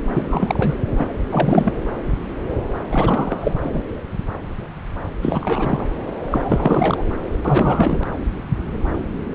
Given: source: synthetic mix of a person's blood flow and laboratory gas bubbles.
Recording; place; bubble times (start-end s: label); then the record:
Doppler ultrasound of blood flow; subclavian vein
0.14-0.75 s: bubbles
0.96-1.07 s: bubbles
1.31-1.73 s: bubbles
2.91-3.54 s: bubbles
3.63-3.83 s: bubbles
5.21-5.86 s: bubbles
6.31-7.03 s: bubbles
7.45-7.98 s: bubbles
From the record:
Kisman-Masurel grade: 333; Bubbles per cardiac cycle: rolling drumbeat, 9 or more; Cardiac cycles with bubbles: 50 to 99%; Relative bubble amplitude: loud (0.450 to 0.775); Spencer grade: 3 (all of the cardiac periods contain showers or single bubble signals, but not dominating or overriding the cardiac motion signals); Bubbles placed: anywhere in the cardiac cycle